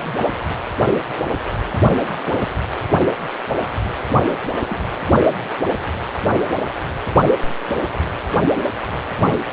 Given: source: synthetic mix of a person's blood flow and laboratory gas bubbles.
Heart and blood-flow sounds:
Doppler ultrasound of blood flow; precordium
1.83-2.09 s: bubbles
2.23-2.52 s: bubbles
2.76-2.80 s: bubbles
4.24-4.33 s: bubbles
4.69-4.77 s: bubbles
9.06-9.11 s: bubbles
9.30-9.40 s: bubbles
From the record:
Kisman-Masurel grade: 121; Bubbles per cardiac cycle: 1 to 2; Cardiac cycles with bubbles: 10 to 50%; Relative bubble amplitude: barely perceptible (0.100 to 0.250); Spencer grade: 2 (many but less than half of the cardiac periods contain bubble signals, singularly or in groups); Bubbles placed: anywhere in the cardiac cycle

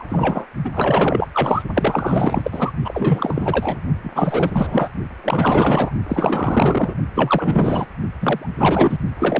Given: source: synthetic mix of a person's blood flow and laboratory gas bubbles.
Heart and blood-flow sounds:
Doppler ultrasound of blood flow; precordium
0.00-0.46 s: bubbles
0.64-0.71 s: bubbles
0.75-1.27 s: bubbles
1.33-1.62 s: bubbles
1.73-2.72 s: bubbles
2.84-3.79 s: bubbles
4.03-4.11 s: bubbles
4.15-4.89 s: bubbles
5.24-5.91 s: bubbles
6.08-6.95 s: bubbles
7.15-7.86 s: bubbles
8.21-8.50 s: bubbles
8.57-8.97 s: bubbles
9.18-9.40 s: bubbles
From the record:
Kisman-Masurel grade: 444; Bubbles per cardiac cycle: continuous sound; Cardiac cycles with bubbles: 100%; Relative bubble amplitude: maximal (0.775 to 0.999); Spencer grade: 4 (maximum detectable bubble signal sounding continuously throughout systole and diastole of every cardiac period, and overriding the amplitude of the normal cardiac signals); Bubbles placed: only in the low amplitude regions of the cardiac cycle

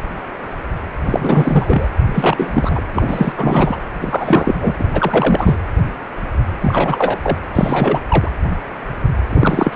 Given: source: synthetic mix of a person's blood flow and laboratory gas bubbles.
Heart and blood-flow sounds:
Doppler ultrasound of blood flow; precordium
1.03-1.90 s: bubbles
2.13-2.81 s: bubbles
2.94-3.32 s: bubbles
3.37-3.79 s: bubbles
3.99-4.55 s: bubbles
4.60-4.73 s: bubbles
4.79-4.84 s: bubbles
4.93-5.59 s: bubbles
6.62-7.18 s: bubbles
7.23-7.38 s: bubbles
7.53-8.01 s: bubbles
8.08-8.31 s: bubbles
9.29-9.76 s: bubbles
From the record:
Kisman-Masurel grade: 333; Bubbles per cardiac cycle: rolling drumbeat, 9 or more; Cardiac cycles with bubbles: 50 to 99%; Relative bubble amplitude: loud (0.450 to 0.775); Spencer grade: 3 (all of the cardiac periods contain showers or single bubble signals, but not dominating or overriding the cardiac motion signals); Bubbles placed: anywhere in the cardiac cycle

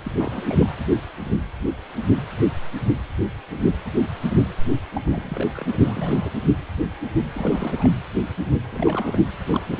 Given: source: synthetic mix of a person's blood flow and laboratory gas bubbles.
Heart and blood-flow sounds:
Doppler ultrasound of blood flow; precordium
0.02-0.12 s: bubbles
0.16-0.77 s: bubbles
4.92-5.01 s: bubbles
5.04-6.31 s: bubbles
7.33-7.90 s: bubbles
8.71-9.21 s: bubbles
9.52-9.62 s: bubbles
9.66-9.79 s: bubbles
From the record:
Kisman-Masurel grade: 221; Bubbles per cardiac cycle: several, 3 to 8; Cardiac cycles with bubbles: 10 to 50%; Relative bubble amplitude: barely perceptible (0.100 to 0.250); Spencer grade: 2 (many but less than half of the cardiac periods contain bubble signals, singularly or in groups); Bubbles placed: anywhere in the cardiac cycle

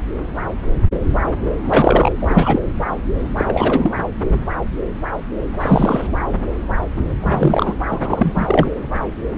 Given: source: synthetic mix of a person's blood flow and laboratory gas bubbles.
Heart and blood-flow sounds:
Doppler ultrasound of blood flow; subclavian vein
1.67-2.12 s: bubbles
2.20-2.59 s: bubbles
3.37-3.90 s: bubbles
5.60-6.08 s: bubbles
7.21-7.74 s: bubbles
7.91-8.70 s: bubbles
From the record:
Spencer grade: 2 (many but less than half of the cardiac periods contain bubble signals, singularly or in groups); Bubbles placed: anywhere in the cardiac cycle

